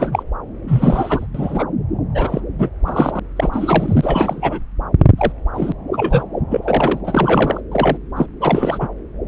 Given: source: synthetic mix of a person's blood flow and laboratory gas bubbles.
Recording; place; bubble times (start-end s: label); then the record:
Doppler ultrasound of blood flow; subclavian vein
0.00-0.23 s: bubbles
0.68-1.26 s: bubbles
1.34-1.64 s: bubbles
2.14-2.40 s: bubbles
2.58-2.69 s: bubbles
2.85-3.19 s: bubbles
3.36-3.49 s: bubbles
3.52-4.60 s: bubbles
5.18-5.32 s: bubbles
5.53-5.72 s: bubbles
5.93-6.23 s: bubbles
6.50-7.00 s: bubbles
7.04-7.61 s: bubbles
7.71-7.97 s: bubbles
8.16-8.26 s: bubbles
8.40-8.88 s: bubbles
From the record:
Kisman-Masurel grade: 243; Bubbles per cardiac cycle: several, 3 to 8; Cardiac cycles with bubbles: 100%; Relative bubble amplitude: loud (0.450 to 0.775); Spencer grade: 3 (all of the cardiac periods contain showers or single bubble signals, but not dominating or overriding the cardiac motion signals); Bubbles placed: anywhere in the cardiac cycle